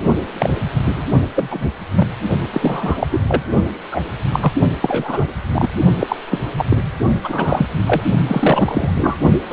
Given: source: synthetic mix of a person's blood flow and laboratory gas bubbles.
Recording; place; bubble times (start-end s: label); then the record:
Doppler ultrasound of blood flow; precordium
0.38-0.56 s: bubbles
0.83-1.03 s: bubbles
1.35-1.69 s: bubbles
1.94-2.08 s: bubbles
2.50-3.07 s: bubbles
3.11-3.20 s: bubbles
3.28-3.43 s: bubbles
3.91-4.03 s: bubbles
4.32-4.53 s: bubbles
4.82-5.33 s: bubbles
5.52-5.69 s: bubbles
6.00-6.16 s: bubbles
6.31-6.39 s: bubbles
6.57-6.66 s: bubbles
6.70-6.78 s: bubbles
7.24-7.67 s: bubbles
7.88-8.02 s: bubbles
8.27-8.90 s: bubbles
8.96-9.17 s: bubbles
9.49-9.53 s: bubbles
From the record:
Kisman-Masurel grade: 243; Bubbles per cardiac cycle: several, 3 to 8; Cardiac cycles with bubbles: 100%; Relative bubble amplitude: loud (0.450 to 0.775); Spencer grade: 3 (all of the cardiac periods contain showers or single bubble signals, but not dominating or overriding the cardiac motion signals); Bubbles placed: only in the low amplitude regions of the cardiac cycle